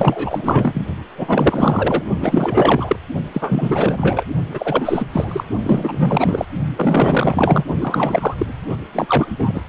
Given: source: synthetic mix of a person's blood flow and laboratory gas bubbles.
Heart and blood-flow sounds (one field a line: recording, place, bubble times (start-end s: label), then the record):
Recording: Doppler ultrasound of blood flow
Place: precordium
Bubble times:
0.00-0.85 s: bubbles
1.17-2.03 s: bubbles
2.21-2.96 s: bubbles
3.33-4.24 s: bubbles
4.50-5.05 s: bubbles
5.12-5.44 s: bubbles
5.63-6.46 s: bubbles
6.75-7.65 s: bubbles
7.80-8.34 s: bubbles
8.38-8.46 s: bubbles
8.69-8.77 s: bubbles
8.93-9.62 s: bubbles
From the record:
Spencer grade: 4 (maximum detectable bubble signal sounding continuously throughout systole and diastole of every cardiac period, and overriding the amplitude of the normal cardiac signals)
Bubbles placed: only in the low amplitude regions of the cardiac cycle